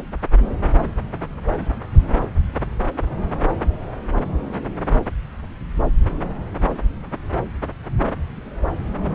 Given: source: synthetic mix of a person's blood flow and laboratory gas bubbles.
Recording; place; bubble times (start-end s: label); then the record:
Doppler ultrasound of blood flow; subclavian vein
no bubbles
From the record:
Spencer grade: 0 (complete lack of bubble signals)